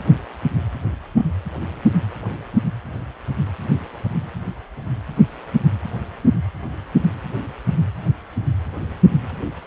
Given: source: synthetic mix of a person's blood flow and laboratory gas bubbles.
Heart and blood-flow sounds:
Doppler ultrasound of blood flow; precordium
no bubbles
From the record:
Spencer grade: 0 (complete lack of bubble signals)

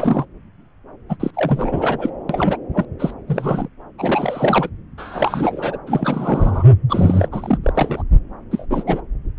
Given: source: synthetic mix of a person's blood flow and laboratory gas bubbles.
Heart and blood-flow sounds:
Doppler ultrasound of blood flow; subclavian vein
0.00-0.25 s: bubbles
1.09-1.17 s: bubbles
1.19-1.31 s: bubbles
1.34-2.10 s: bubbles
2.29-2.58 s: bubbles
2.74-2.85 s: bubbles
2.99-3.14 s: bubbles
3.27-3.68 s: bubbles
3.98-4.69 s: bubbles
4.97-5.78 s: bubbles
5.86-6.64 s: bubbles
6.89-7.29 s: bubbles
7.31-7.58 s: bubbles
7.63-8.03 s: bubbles
8.51-8.66 s: bubbles
8.70-8.84 s: bubbles
8.87-9.01 s: bubbles
From the record:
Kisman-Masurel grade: 342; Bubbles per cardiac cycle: rolling drumbeat, 9 or more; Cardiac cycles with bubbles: 100%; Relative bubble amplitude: moderate (0.250 to 0.450); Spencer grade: 3 (all of the cardiac periods contain showers or single bubble signals, but not dominating or overriding the cardiac motion signals); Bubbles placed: anywhere in the cardiac cycle

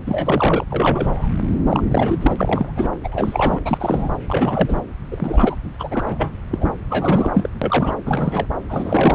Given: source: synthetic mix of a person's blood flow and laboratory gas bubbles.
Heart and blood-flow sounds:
Doppler ultrasound of blood flow; subclavian vein
0.05-0.64 s: bubbles
0.70-1.31 s: bubbles
1.69-1.83 s: bubbles
1.91-2.89 s: bubbles
3.04-3.60 s: bubbles
3.65-4.17 s: bubbles
4.28-4.80 s: bubbles
5.11-5.56 s: bubbles
5.79-5.88 s: bubbles
5.91-6.32 s: bubbles
6.51-6.72 s: bubbles
6.90-7.50 s: bubbles
7.62-7.92 s: bubbles
8.05-8.46 s: bubbles
8.69-9.15 s: bubbles
From the record:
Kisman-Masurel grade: 342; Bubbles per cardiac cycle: rolling drumbeat, 9 or more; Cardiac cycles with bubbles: 100%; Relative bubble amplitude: moderate (0.250 to 0.450); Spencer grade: 3 (all of the cardiac periods contain showers or single bubble signals, but not dominating or overriding the cardiac motion signals); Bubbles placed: anywhere in the cardiac cycle

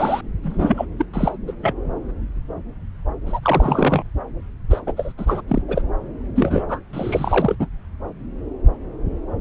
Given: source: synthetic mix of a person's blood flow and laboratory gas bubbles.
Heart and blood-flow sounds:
Doppler ultrasound of blood flow; subclavian vein
0.00-0.21 s: bubbles
0.43-0.85 s: bubbles
0.98-1.05 s: bubbles
1.14-1.38 s: bubbles
1.47-1.52 s: bubbles
1.62-1.74 s: bubbles
3.26-4.04 s: bubbles
4.70-4.80 s: bubbles
4.86-4.92 s: bubbles
4.96-5.12 s: bubbles
5.17-5.41 s: bubbles
5.47-5.62 s: bubbles
5.68-5.82 s: bubbles
6.35-6.63 s: bubbles
6.68-6.80 s: bubbles
6.93-7.55 s: bubbles
7.59-7.67 s: bubbles
From the record:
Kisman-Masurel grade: 332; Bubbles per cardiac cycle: rolling drumbeat, 9 or more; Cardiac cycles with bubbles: 50 to 99%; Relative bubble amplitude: moderate (0.250 to 0.450); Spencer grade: 3 (all of the cardiac periods contain showers or single bubble signals, but not dominating or overriding the cardiac motion signals); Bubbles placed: anywhere in the cardiac cycle

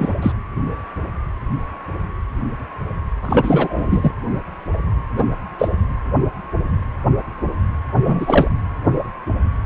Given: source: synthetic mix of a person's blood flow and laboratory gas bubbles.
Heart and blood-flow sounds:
Doppler ultrasound of blood flow; precordium
0.00-0.14 s: bubbles
0.22-0.32 s: bubbles
3.22-4.11 s: bubbles
5.16-5.29 s: bubbles
5.58-5.68 s: bubbles
8.04-8.48 s: bubbles
From the record:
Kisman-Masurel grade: 223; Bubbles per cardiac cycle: several, 3 to 8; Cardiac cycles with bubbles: 10 to 50%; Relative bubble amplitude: loud (0.450 to 0.775); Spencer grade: 2 (many but less than half of the cardiac periods contain bubble signals, singularly or in groups); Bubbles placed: anywhere in the cardiac cycle

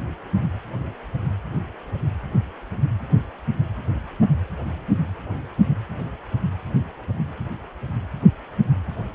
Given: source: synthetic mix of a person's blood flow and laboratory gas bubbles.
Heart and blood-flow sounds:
Doppler ultrasound of blood flow; precordium
no bubbles
From the record:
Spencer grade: 0 (complete lack of bubble signals)

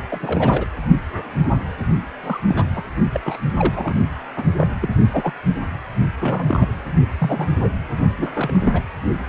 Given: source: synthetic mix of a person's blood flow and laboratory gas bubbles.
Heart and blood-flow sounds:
Doppler ultrasound of blood flow; precordium
0.09-0.65 s: bubbles
2.23-2.41 s: bubbles
2.46-2.67 s: bubbles
2.75-2.83 s: bubbles
3.13-3.20 s: bubbles
3.25-3.37 s: bubbles
3.57-3.94 s: bubbles
4.36-4.44 s: bubbles
4.58-4.67 s: bubbles
4.81-4.89 s: bubbles
5.12-5.33 s: bubbles
6.19-6.67 s: bubbles
7.18-7.48 s: bubbles
7.62-7.69 s: bubbles
8.17-8.82 s: bubbles
From the record:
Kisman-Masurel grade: 232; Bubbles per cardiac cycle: several, 3 to 8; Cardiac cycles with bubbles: 50 to 99%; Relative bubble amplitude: moderate (0.250 to 0.450); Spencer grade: 3 (all of the cardiac periods contain showers or single bubble signals, but not dominating or overriding the cardiac motion signals); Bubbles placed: only in the low amplitude regions of the cardiac cycle

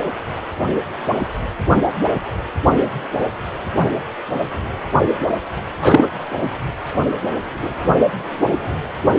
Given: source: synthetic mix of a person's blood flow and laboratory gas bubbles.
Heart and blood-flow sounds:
Doppler ultrasound of blood flow; precordium
5.80-6.08 s: bubbles
From the record:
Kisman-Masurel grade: 223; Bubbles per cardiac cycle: several, 3 to 8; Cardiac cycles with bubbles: 10 to 50%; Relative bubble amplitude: loud (0.450 to 0.775); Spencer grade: 2 (many but less than half of the cardiac periods contain bubble signals, singularly or in groups); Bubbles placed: only in the low amplitude regions of the cardiac cycle

